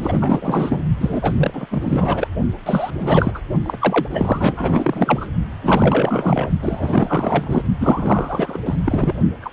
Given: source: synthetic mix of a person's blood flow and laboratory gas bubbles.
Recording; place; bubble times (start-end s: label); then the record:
Doppler ultrasound of blood flow; precordium
0.00-0.86 s: bubbles
1.01-1.33 s: bubbles
1.36-1.66 s: bubbles
1.71-2.27 s: bubbles
2.66-2.91 s: bubbles
2.98-3.42 s: bubbles
3.64-3.77 s: bubbles
3.81-4.08 s: bubbles
4.10-5.28 s: bubbles
5.62-6.50 s: bubbles
6.61-7.62 s: bubbles
7.78-8.59 s: bubbles
8.66-8.78 s: bubbles
8.85-9.15 s: bubbles
9.41-9.52 s: bubbles
From the record:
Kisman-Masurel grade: 444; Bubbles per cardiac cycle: continuous sound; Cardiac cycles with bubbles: 100%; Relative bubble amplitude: maximal (0.775 to 0.999); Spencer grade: 4 (maximum detectable bubble signal sounding continuously throughout systole and diastole of every cardiac period, and overriding the amplitude of the normal cardiac signals); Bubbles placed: only in the low amplitude regions of the cardiac cycle